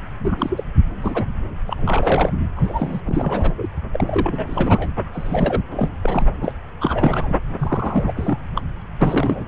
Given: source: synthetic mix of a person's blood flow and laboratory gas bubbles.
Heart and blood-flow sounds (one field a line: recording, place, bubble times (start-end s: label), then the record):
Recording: Doppler ultrasound of blood flow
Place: subclavian vein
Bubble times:
0.19-0.64 s: bubbles
1.02-1.26 s: bubbles
1.67-2.31 s: bubbles
2.56-3.02 s: bubbles
3.05-3.54 s: bubbles
3.58-3.67 s: bubbles
3.92-4.90 s: bubbles
5.12-5.61 s: bubbles
5.71-5.89 s: bubbles
6.01-6.25 s: bubbles
6.42-6.52 s: bubbles
6.80-7.37 s: bubbles
7.59-8.13 s: bubbles
8.16-8.39 s: bubbles
8.54-8.61 s: bubbles
9.01-9.43 s: bubbles
From the record:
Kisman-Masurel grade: 342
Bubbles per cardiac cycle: rolling drumbeat, 9 or more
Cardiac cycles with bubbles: 100%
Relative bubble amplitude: moderate (0.250 to 0.450)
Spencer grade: 3 (all of the cardiac periods contain showers or single bubble signals, but not dominating or overriding the cardiac motion signals)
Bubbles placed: anywhere in the cardiac cycle